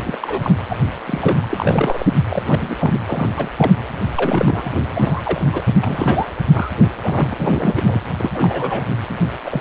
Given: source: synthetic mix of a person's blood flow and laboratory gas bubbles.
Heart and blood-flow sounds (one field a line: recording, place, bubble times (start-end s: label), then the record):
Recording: Doppler ultrasound of blood flow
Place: precordium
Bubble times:
0.00-0.19 s: bubbles
0.21-0.52 s: bubbles
0.69-0.77 s: bubbles
1.07-1.46 s: bubbles
1.49-2.06 s: bubbles
2.29-2.42 s: bubbles
2.45-2.76 s: bubbles
2.79-3.00 s: bubbles
3.06-3.31 s: bubbles
3.37-3.49 s: bubbles
3.56-3.72 s: bubbles
4.15-4.71 s: bubbles
4.95-5.41 s: bubbles
5.53-5.61 s: bubbles
5.80-6.28 s: bubbles
6.53-6.71 s: bubbles
7.00-7.33 s: bubbles
7.38-8.07 s: bubbles
8.17-8.30 s: bubbles
8.33-8.84 s: bubbles
9.08-9.12 s: bubbles
9.45-9.61 s: bubbles
From the record:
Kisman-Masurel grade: 242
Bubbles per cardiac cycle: several, 3 to 8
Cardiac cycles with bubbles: 100%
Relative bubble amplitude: moderate (0.250 to 0.450)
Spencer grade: 3 (all of the cardiac periods contain showers or single bubble signals, but not dominating or overriding the cardiac motion signals)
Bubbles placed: anywhere in the cardiac cycle